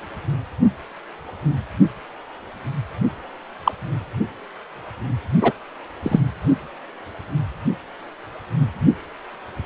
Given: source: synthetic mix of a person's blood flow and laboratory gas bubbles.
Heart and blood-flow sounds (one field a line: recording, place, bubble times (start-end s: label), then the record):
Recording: Doppler ultrasound of blood flow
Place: precordium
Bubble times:
3.65-3.72 s: bubbles
5.41-5.53 s: bubbles
6.03-6.20 s: bubbles
From the record:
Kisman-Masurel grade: 123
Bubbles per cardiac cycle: 1 to 2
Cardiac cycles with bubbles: 10 to 50%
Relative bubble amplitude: loud (0.450 to 0.775)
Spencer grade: 2 (many but less than half of the cardiac periods contain bubble signals, singularly or in groups)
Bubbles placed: anywhere in the cardiac cycle